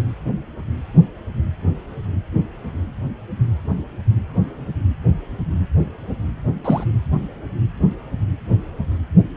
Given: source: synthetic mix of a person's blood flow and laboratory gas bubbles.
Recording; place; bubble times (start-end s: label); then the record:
Doppler ultrasound of blood flow; precordium
6.64-6.84 s: bubbles
From the record:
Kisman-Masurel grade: 113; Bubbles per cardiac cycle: 1 to 2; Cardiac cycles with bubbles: 1 to 10%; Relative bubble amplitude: loud (0.450 to 0.775); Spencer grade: 1 (occasional bubble signal discernible with the cardiac motion signal, with majority of cardiac periods free of bubbles); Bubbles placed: anywhere in the cardiac cycle